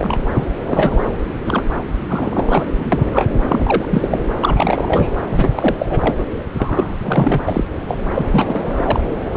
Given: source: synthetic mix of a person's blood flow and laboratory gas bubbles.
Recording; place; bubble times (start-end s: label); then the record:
Doppler ultrasound of blood flow; subclavian vein
0.00-0.47 s: bubbles
0.67-1.04 s: bubbles
1.45-1.63 s: bubbles
2.08-2.64 s: bubbles
2.75-3.31 s: bubbles
3.48-3.86 s: bubbles
3.90-4.18 s: bubbles
4.41-5.12 s: bubbles
5.30-5.49 s: bubbles
5.55-5.75 s: bubbles
5.79-6.25 s: bubbles
6.54-6.97 s: bubbles
7.03-7.64 s: bubbles
7.88-8.01 s: bubbles
8.13-8.25 s: bubbles
8.30-9.00 s: bubbles
9.33-9.37 s: bubbles
From the record:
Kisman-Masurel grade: 343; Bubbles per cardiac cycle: rolling drumbeat, 9 or more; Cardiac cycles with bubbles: 100%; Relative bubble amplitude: loud (0.450 to 0.775); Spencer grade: 3 (all of the cardiac periods contain showers or single bubble signals, but not dominating or overriding the cardiac motion signals); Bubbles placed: anywhere in the cardiac cycle